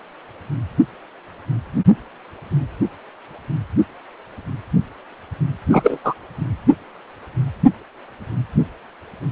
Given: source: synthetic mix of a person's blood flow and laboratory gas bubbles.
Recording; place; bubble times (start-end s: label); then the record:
Doppler ultrasound of blood flow; precordium
5.67-5.98 s: bubbles
6.04-6.13 s: bubbles
From the record:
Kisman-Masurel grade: 213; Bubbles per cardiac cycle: several, 3 to 8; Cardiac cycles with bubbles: 1 to 10%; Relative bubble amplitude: loud (0.450 to 0.775); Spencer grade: 1 (occasional bubble signal discernible with the cardiac motion signal, with majority of cardiac periods free of bubbles); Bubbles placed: anywhere in the cardiac cycle